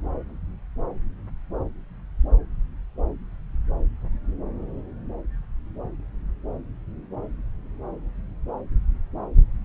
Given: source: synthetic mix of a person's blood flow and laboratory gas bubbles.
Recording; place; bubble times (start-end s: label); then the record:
Doppler ultrasound of blood flow; subclavian vein
no bubbles
From the record:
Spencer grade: 0 (complete lack of bubble signals)